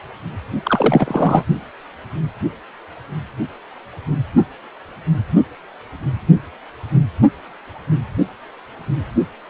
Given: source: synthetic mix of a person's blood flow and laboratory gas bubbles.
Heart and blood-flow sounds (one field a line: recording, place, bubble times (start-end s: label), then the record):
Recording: Doppler ultrasound of blood flow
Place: precordium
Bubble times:
0.64-1.44 s: bubbles
From the record:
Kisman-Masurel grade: 213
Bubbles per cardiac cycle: several, 3 to 8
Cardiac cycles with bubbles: 1 to 10%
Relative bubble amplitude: loud (0.450 to 0.775)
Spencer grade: 1 (occasional bubble signal discernible with the cardiac motion signal, with majority of cardiac periods free of bubbles)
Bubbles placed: only in the low amplitude regions of the cardiac cycle